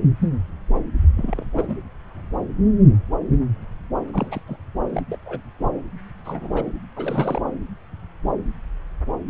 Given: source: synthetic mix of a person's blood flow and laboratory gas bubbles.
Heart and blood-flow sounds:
Doppler ultrasound of blood flow; subclavian vein
1.17-1.45 s: bubbles
1.53-1.78 s: bubbles
4.13-4.42 s: bubbles
4.48-4.57 s: bubbles
4.93-5.04 s: bubbles
5.10-5.18 s: bubbles
5.25-5.41 s: bubbles
6.25-6.66 s: bubbles
6.96-7.42 s: bubbles
From the record:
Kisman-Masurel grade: 221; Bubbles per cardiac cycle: several, 3 to 8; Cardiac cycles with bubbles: 10 to 50%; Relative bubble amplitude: barely perceptible (0.100 to 0.250); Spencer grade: 2 (many but less than half of the cardiac periods contain bubble signals, singularly or in groups); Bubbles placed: anywhere in the cardiac cycle

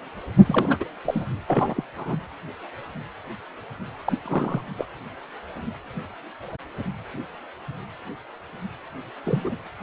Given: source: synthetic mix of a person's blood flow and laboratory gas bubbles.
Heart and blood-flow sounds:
Doppler ultrasound of blood flow; precordium
0.46-0.77 s: bubbles
0.80-0.85 s: bubbles
1.04-1.24 s: bubbles
1.47-1.84 s: bubbles
1.96-2.17 s: bubbles
4.05-4.18 s: bubbles
4.23-4.62 s: bubbles
4.77-4.86 s: bubbles
9.23-9.56 s: bubbles
From the record:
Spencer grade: 2 (many but less than half of the cardiac periods contain bubble signals, singularly or in groups); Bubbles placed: anywhere in the cardiac cycle

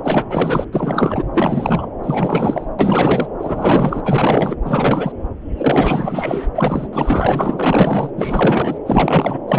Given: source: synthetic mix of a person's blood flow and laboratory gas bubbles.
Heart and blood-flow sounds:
Doppler ultrasound of blood flow; subclavian vein
0.03-0.65 s: bubbles
0.73-1.23 s: bubbles
1.33-1.86 s: bubbles
2.03-2.66 s: bubbles
2.79-3.27 s: bubbles
3.39-4.00 s: bubbles
4.04-4.56 s: bubbles
4.64-5.12 s: bubbles
5.57-6.46 s: bubbles
6.55-6.88 s: bubbles
6.92-8.11 s: bubbles
8.17-8.79 s: bubbles
8.86-9.38 s: bubbles
9.48-9.59 s: bubbles
From the record:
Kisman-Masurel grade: 444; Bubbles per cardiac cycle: continuous sound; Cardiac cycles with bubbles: 100%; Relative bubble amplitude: maximal (0.775 to 0.999); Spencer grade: 4 (maximum detectable bubble signal sounding continuously throughout systole and diastole of every cardiac period, and overriding the amplitude of the normal cardiac signals); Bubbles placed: anywhere in the cardiac cycle

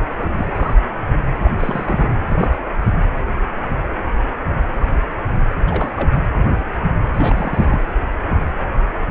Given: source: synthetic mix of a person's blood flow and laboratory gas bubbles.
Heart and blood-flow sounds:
Doppler ultrasound of blood flow; precordium
0.17-0.31 s: bubbles
0.34-0.74 s: bubbles
1.43-1.51 s: bubbles
1.59-2.12 s: bubbles
2.21-2.26 s: bubbles
2.32-2.57 s: bubbles
5.67-6.12 s: bubbles
7.14-7.84 s: bubbles
From the record:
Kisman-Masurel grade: 222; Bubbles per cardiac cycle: several, 3 to 8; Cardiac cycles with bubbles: 10 to 50%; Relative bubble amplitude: moderate (0.250 to 0.450); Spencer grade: 2 (many but less than half of the cardiac periods contain bubble signals, singularly or in groups); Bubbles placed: anywhere in the cardiac cycle

